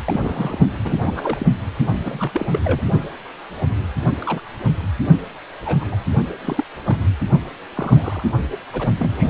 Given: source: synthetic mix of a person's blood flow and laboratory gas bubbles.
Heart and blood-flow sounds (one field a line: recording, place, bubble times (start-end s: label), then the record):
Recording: Doppler ultrasound of blood flow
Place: precordium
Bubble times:
0.05-0.67 s: bubbles
0.84-1.46 s: bubbles
1.93-2.46 s: bubbles
2.52-2.59 s: bubbles
2.64-2.81 s: bubbles
3.61-3.66 s: bubbles
4.21-4.41 s: bubbles
5.65-5.96 s: bubbles
6.45-6.64 s: bubbles
6.86-6.97 s: bubbles
7.75-8.23 s: bubbles
8.51-8.57 s: bubbles
8.72-8.88 s: bubbles
8.99-9.30 s: bubbles
From the record:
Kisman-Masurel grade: 232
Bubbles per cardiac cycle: several, 3 to 8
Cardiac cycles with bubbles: 50 to 99%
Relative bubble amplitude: moderate (0.250 to 0.450)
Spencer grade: 3 (all of the cardiac periods contain showers or single bubble signals, but not dominating or overriding the cardiac motion signals)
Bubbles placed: anywhere in the cardiac cycle